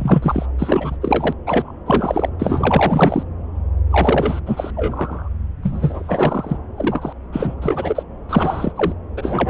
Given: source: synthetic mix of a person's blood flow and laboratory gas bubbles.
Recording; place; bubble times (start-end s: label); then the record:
Doppler ultrasound of blood flow; subclavian vein
0.00-0.46 s: bubbles
0.58-0.97 s: bubbles
1.01-1.33 s: bubbles
1.47-1.72 s: bubbles
1.86-2.29 s: bubbles
2.39-3.23 s: bubbles
3.90-4.41 s: bubbles
4.46-4.71 s: bubbles
4.76-5.29 s: bubbles
5.62-6.58 s: bubbles
6.77-7.13 s: bubbles
7.32-7.55 s: bubbles
7.62-8.03 s: bubbles
8.29-8.72 s: bubbles
8.76-8.94 s: bubbles
9.16-9.49 s: bubbles
From the record:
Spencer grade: 4 (maximum detectable bubble signal sounding continuously throughout systole and diastole of every cardiac period, and overriding the amplitude of the normal cardiac signals); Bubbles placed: anywhere in the cardiac cycle